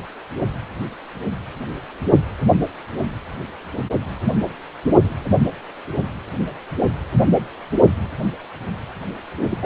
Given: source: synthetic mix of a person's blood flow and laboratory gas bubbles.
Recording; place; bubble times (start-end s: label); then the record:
Doppler ultrasound of blood flow; precordium
9.50-9.58 s: bubbles
9.62-9.66 s: bubbles
From the record:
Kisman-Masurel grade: 212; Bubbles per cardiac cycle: several, 3 to 8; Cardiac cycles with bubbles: 1 to 10%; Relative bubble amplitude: moderate (0.250 to 0.450); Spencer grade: 1 (occasional bubble signal discernible with the cardiac motion signal, with majority of cardiac periods free of bubbles); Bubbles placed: anywhere in the cardiac cycle